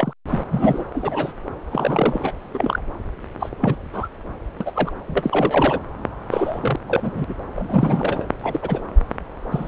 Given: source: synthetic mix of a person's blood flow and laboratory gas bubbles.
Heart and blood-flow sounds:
Doppler ultrasound of blood flow; subclavian vein
0.00-0.13 s: bubbles
0.29-0.42 s: bubbles
0.51-0.84 s: bubbles
0.93-1.33 s: bubbles
1.70-2.33 s: bubbles
2.54-2.87 s: bubbles
3.40-3.49 s: bubbles
3.60-3.76 s: bubbles
3.93-4.08 s: bubbles
4.60-4.72 s: bubbles
4.75-4.91 s: bubbles
5.08-5.80 s: bubbles
6.30-6.76 s: bubbles
6.88-7.34 s: bubbles
7.55-8.28 s: bubbles
8.39-8.81 s: bubbles
9.51-9.68 s: bubbles
From the record:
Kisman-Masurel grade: 242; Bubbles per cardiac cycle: several, 3 to 8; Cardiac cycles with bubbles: 100%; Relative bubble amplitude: moderate (0.250 to 0.450); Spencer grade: 3 (all of the cardiac periods contain showers or single bubble signals, but not dominating or overriding the cardiac motion signals); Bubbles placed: anywhere in the cardiac cycle

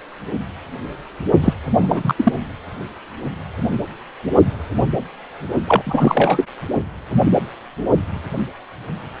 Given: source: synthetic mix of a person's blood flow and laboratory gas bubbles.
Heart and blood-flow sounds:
Doppler ultrasound of blood flow; precordium
1.41-1.53 s: bubbles
1.80-2.13 s: bubbles
2.17-2.32 s: bubbles
5.67-6.44 s: bubbles
From the record:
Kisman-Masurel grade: 223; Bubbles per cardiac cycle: several, 3 to 8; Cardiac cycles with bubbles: 10 to 50%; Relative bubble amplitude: loud (0.450 to 0.775); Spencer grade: 2 (many but less than half of the cardiac periods contain bubble signals, singularly or in groups); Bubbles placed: only in the low amplitude regions of the cardiac cycle

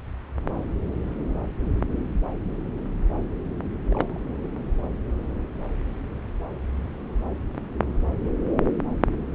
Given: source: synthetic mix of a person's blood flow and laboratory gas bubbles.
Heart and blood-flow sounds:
Doppler ultrasound of blood flow; subclavian vein
3.89-4.20 s: bubbles
From the record:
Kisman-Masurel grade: 111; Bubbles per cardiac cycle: 1 to 2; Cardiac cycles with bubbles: 1 to 10%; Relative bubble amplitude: barely perceptible (0.100 to 0.250); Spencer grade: 1 (occasional bubble signal discernible with the cardiac motion signal, with majority of cardiac periods free of bubbles); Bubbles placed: anywhere in the cardiac cycle

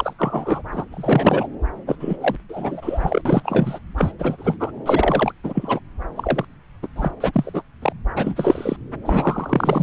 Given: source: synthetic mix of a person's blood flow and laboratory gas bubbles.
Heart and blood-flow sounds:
Doppler ultrasound of blood flow; subclavian vein
0.00-0.13 s: bubbles
0.18-0.62 s: bubbles
0.71-0.85 s: bubbles
0.91-1.48 s: bubbles
1.85-1.96 s: bubbles
2.00-2.16 s: bubbles
2.21-2.35 s: bubbles
2.49-3.22 s: bubbles
3.25-3.79 s: bubbles
3.96-4.11 s: bubbles
4.18-4.56 s: bubbles
4.59-4.71 s: bubbles
4.85-5.32 s: bubbles
5.43-5.79 s: bubbles
6.15-6.45 s: bubbles
6.82-6.88 s: bubbles
6.96-7.11 s: bubbles
7.20-7.62 s: bubbles
7.81-7.92 s: bubbles
8.15-8.76 s: bubbles
9.02-9.83 s: bubbles
From the record:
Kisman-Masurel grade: 343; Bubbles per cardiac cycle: rolling drumbeat, 9 or more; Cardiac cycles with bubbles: 100%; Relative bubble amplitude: loud (0.450 to 0.775); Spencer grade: 3 (all of the cardiac periods contain showers or single bubble signals, but not dominating or overriding the cardiac motion signals); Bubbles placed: anywhere in the cardiac cycle

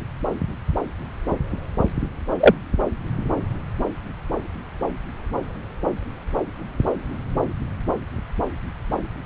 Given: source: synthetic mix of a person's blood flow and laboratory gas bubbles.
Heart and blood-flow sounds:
Doppler ultrasound of blood flow; subclavian vein
2.39-2.54 s: bubbles
From the record:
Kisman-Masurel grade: 113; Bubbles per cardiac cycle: 1 to 2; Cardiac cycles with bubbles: 1 to 10%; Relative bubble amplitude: loud (0.450 to 0.775); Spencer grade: 1 (occasional bubble signal discernible with the cardiac motion signal, with majority of cardiac periods free of bubbles); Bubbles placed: anywhere in the cardiac cycle

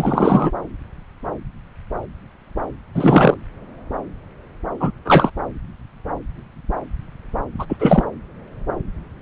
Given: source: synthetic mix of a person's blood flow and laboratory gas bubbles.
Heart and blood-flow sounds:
Doppler ultrasound of blood flow; subclavian vein
0.00-0.51 s: bubbles
2.94-3.34 s: bubbles
4.80-4.91 s: bubbles
5.05-5.31 s: bubbles
7.58-7.66 s: bubbles
7.69-7.76 s: bubbles
7.80-8.04 s: bubbles
From the record:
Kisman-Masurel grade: 223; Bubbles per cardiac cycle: several, 3 to 8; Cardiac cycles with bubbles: 10 to 50%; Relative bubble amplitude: loud (0.450 to 0.775); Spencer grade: 2 (many but less than half of the cardiac periods contain bubble signals, singularly or in groups); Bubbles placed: anywhere in the cardiac cycle

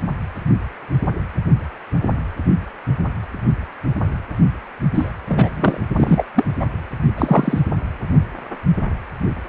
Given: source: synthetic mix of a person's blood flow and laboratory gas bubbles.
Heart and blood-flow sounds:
Doppler ultrasound of blood flow; precordium
4.93-5.11 s: bubbles
5.28-5.80 s: bubbles
5.96-6.25 s: bubbles
6.34-6.44 s: bubbles
6.59-6.66 s: bubbles
7.17-7.60 s: bubbles
From the record:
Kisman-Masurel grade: 223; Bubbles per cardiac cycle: several, 3 to 8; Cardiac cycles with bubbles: 10 to 50%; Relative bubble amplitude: loud (0.450 to 0.775); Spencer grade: 2 (many but less than half of the cardiac periods contain bubble signals, singularly or in groups); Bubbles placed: only in the low amplitude regions of the cardiac cycle

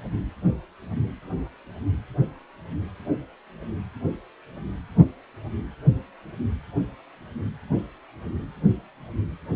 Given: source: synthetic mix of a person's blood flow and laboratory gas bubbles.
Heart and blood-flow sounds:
Doppler ultrasound of blood flow; precordium
no bubbles
From the record:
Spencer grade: 0 (complete lack of bubble signals)

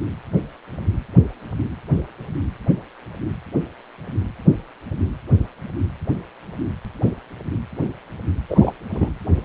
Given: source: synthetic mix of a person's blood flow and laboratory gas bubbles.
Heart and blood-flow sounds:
Doppler ultrasound of blood flow; precordium
8.49-8.71 s: bubbles
8.92-9.10 s: bubbles
From the record:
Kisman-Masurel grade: 113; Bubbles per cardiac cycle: 1 to 2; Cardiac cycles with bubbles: 1 to 10%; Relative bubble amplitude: loud (0.450 to 0.775); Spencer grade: 1 (occasional bubble signal discernible with the cardiac motion signal, with majority of cardiac periods free of bubbles); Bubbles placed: anywhere in the cardiac cycle

